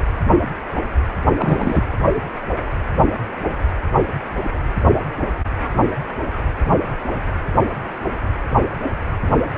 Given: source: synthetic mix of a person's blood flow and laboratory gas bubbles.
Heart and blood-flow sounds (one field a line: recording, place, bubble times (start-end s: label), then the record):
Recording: Doppler ultrasound of blood flow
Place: precordium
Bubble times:
1.38-1.82 s: bubbles
From the record:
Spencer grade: 1 (occasional bubble signal discernible with the cardiac motion signal, with majority of cardiac periods free of bubbles)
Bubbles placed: anywhere in the cardiac cycle